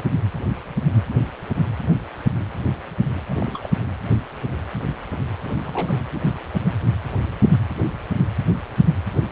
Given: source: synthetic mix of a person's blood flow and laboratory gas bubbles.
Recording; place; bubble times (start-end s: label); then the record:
Doppler ultrasound of blood flow; precordium
3.29-3.73 s: bubbles
5.42-6.01 s: bubbles
From the record:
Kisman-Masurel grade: 211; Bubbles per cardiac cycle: several, 3 to 8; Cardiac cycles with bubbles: 1 to 10%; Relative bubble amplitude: barely perceptible (0.100 to 0.250); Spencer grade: 1 (occasional bubble signal discernible with the cardiac motion signal, with majority of cardiac periods free of bubbles); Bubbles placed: anywhere in the cardiac cycle